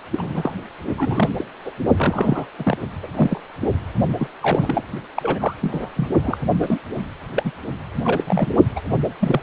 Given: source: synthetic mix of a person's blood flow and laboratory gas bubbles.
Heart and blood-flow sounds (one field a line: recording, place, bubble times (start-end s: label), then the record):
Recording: Doppler ultrasound of blood flow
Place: precordium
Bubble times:
0.11-0.52 s: bubbles
0.97-1.29 s: bubbles
1.38-1.44 s: bubbles
1.65-1.72 s: bubbles
1.97-2.46 s: bubbles
2.58-2.77 s: bubbles
3.02-3.07 s: bubbles
3.15-3.40 s: bubbles
4.18-4.28 s: bubbles
4.41-4.84 s: bubbles
5.14-5.54 s: bubbles
5.62-5.89 s: bubbles
5.96-6.08 s: bubbles
6.22-6.37 s: bubbles
6.58-6.79 s: bubbles
7.35-7.51 s: bubbles
8.04-8.24 s: bubbles
8.27-8.53 s: bubbles
8.76-8.80 s: bubbles
9.21-9.41 s: bubbles
From the record:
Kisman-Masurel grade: 242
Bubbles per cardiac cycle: several, 3 to 8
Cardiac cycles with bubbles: 100%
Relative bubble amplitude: moderate (0.250 to 0.450)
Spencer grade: 3 (all of the cardiac periods contain showers or single bubble signals, but not dominating or overriding the cardiac motion signals)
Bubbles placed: only in the low amplitude regions of the cardiac cycle